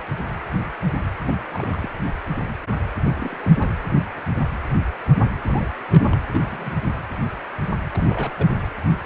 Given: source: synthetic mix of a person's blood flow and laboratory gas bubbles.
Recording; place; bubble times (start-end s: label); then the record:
Doppler ultrasound of blood flow; precordium
1.21-1.33 s: bubbles
1.51-1.89 s: bubbles
3.04-3.10 s: bubbles
3.13-3.70 s: bubbles
5.45-5.71 s: bubbles
5.89-6.09 s: bubbles
6.12-6.17 s: bubbles
6.32-6.76 s: bubbles
6.83-6.88 s: bubbles
7.92-8.31 s: bubbles
8.37-8.47 s: bubbles
From the record:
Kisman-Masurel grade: 221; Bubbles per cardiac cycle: several, 3 to 8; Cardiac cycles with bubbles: 10 to 50%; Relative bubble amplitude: barely perceptible (0.100 to 0.250); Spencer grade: 2 (many but less than half of the cardiac periods contain bubble signals, singularly or in groups); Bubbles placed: anywhere in the cardiac cycle